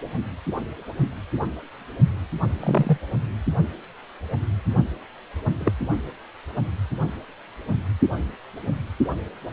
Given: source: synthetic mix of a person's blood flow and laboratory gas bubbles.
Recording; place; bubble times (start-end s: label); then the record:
Doppler ultrasound of blood flow; precordium
2.60-2.98 s: bubbles
5.59-5.72 s: bubbles
From the record:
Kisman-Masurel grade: 122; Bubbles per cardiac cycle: 1 to 2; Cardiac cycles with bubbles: 10 to 50%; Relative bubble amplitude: moderate (0.250 to 0.450); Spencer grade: 2 (many but less than half of the cardiac periods contain bubble signals, singularly or in groups); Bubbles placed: anywhere in the cardiac cycle